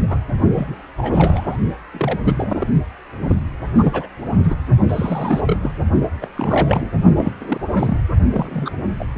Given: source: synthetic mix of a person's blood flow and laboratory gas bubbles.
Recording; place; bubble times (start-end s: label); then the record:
Doppler ultrasound of blood flow; precordium
0.00-0.03 s: bubbles
0.09-0.18 s: bubbles
0.54-0.75 s: bubbles
0.97-1.57 s: bubbles
1.93-2.18 s: bubbles
2.24-2.68 s: bubbles
3.20-3.35 s: bubbles
3.75-4.08 s: bubbles
4.26-4.56 s: bubbles
4.89-5.41 s: bubbles
5.46-5.57 s: bubbles
5.62-5.71 s: bubbles
6.21-6.29 s: bubbles
6.35-6.90 s: bubbles
7.17-7.32 s: bubbles
7.40-7.58 s: bubbles
7.73-7.97 s: bubbles
8.33-8.71 s: bubbles
8.99-9.05 s: bubbles
From the record:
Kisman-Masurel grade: 242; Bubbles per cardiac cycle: several, 3 to 8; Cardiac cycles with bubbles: 100%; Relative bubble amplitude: moderate (0.250 to 0.450); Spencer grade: 3 (all of the cardiac periods contain showers or single bubble signals, but not dominating or overriding the cardiac motion signals); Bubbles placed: only in the low amplitude regions of the cardiac cycle